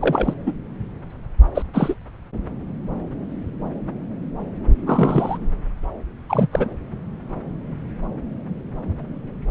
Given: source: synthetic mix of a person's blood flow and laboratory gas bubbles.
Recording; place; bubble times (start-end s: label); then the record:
Doppler ultrasound of blood flow; subclavian vein
0.01-0.34 s: bubbles
0.46-0.52 s: bubbles
1.54-1.63 s: bubbles
1.73-1.94 s: bubbles
4.86-5.38 s: bubbles
6.29-6.47 s: bubbles
6.51-6.69 s: bubbles
From the record:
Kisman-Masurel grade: 222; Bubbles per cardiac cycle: several, 3 to 8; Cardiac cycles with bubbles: 10 to 50%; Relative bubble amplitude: moderate (0.250 to 0.450); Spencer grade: 2 (many but less than half of the cardiac periods contain bubble signals, singularly or in groups); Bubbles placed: anywhere in the cardiac cycle